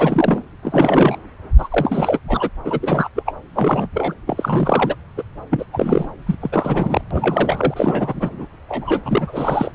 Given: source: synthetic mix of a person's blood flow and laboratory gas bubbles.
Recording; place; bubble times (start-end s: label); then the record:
Doppler ultrasound of blood flow; subclavian vein
0.00-0.43 s: bubbles
0.62-1.16 s: bubbles
1.58-1.69 s: bubbles
1.71-2.19 s: bubbles
2.27-2.49 s: bubbles
2.65-2.79 s: bubbles
2.81-3.09 s: bubbles
3.15-3.23 s: bubbles
3.25-3.35 s: bubbles
3.54-3.87 s: bubbles
3.94-4.14 s: bubbles
4.26-4.96 s: bubbles
5.17-5.22 s: bubbles
5.50-5.65 s: bubbles
5.72-6.09 s: bubbles
6.26-6.35 s: bubbles
6.41-7.01 s: bubbles
7.11-8.47 s: bubbles
8.69-9.01 s: bubbles
9.04-9.71 s: bubbles
From the record:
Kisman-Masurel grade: 342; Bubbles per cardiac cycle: rolling drumbeat, 9 or more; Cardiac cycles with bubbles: 100%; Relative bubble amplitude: moderate (0.250 to 0.450); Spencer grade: 3 (all of the cardiac periods contain showers or single bubble signals, but not dominating or overriding the cardiac motion signals); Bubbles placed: anywhere in the cardiac cycle